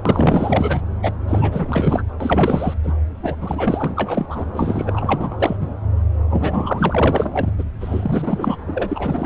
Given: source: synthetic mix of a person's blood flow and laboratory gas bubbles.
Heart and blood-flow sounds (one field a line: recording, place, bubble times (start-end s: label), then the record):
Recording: Doppler ultrasound of blood flow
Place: subclavian vein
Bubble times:
0.05-0.81 s: bubbles
1.02-1.12 s: bubbles
1.28-2.04 s: bubbles
2.20-2.74 s: bubbles
2.83-2.93 s: bubbles
3.22-3.36 s: bubbles
3.41-4.45 s: bubbles
4.53-5.57 s: bubbles
5.60-5.68 s: bubbles
6.30-7.53 s: bubbles
7.58-7.64 s: bubbles
7.81-9.26 s: bubbles
From the record:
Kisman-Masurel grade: 444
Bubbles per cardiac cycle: continuous sound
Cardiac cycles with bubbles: 100%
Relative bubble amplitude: maximal (0.775 to 0.999)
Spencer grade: 4 (maximum detectable bubble signal sounding continuously throughout systole and diastole of every cardiac period, and overriding the amplitude of the normal cardiac signals)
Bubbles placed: anywhere in the cardiac cycle